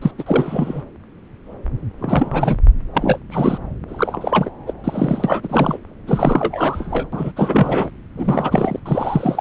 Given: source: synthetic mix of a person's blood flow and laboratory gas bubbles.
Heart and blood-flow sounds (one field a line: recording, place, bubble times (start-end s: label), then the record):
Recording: Doppler ultrasound of blood flow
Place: subclavian vein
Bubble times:
0.02-0.11 s: bubbles
0.18-0.23 s: bubbles
0.26-0.83 s: bubbles
1.99-2.57 s: bubbles
2.94-3.18 s: bubbles
3.30-3.58 s: bubbles
3.88-4.50 s: bubbles
4.67-4.73 s: bubbles
4.84-5.78 s: bubbles
6.07-7.08 s: bubbles
7.12-7.33 s: bubbles
7.36-7.90 s: bubbles
8.16-8.79 s: bubbles
8.86-9.41 s: bubbles
From the record:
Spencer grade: 3 (all of the cardiac periods contain showers or single bubble signals, but not dominating or overriding the cardiac motion signals)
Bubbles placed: anywhere in the cardiac cycle